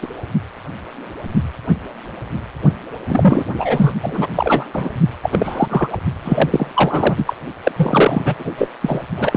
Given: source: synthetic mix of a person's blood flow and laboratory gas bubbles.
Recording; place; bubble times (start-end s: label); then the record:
Doppler ultrasound of blood flow; precordium
0.02-0.08 s: bubbles
3.09-3.44 s: bubbles
3.54-3.92 s: bubbles
4.02-4.27 s: bubbles
4.35-4.67 s: bubbles
4.73-4.90 s: bubbles
5.22-5.88 s: bubbles
5.92-5.98 s: bubbles
6.24-7.33 s: bubbles
7.63-7.72 s: bubbles
7.76-8.35 s: bubbles
8.38-8.52 s: bubbles
8.58-8.69 s: bubbles
8.80-9.02 s: bubbles
9.17-9.37 s: bubbles
From the record:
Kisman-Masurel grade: 333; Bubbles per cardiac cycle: rolling drumbeat, 9 or more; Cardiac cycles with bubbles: 50 to 99%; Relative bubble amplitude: loud (0.450 to 0.775); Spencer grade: 3 (all of the cardiac periods contain showers or single bubble signals, but not dominating or overriding the cardiac motion signals); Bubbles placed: only in the low amplitude regions of the cardiac cycle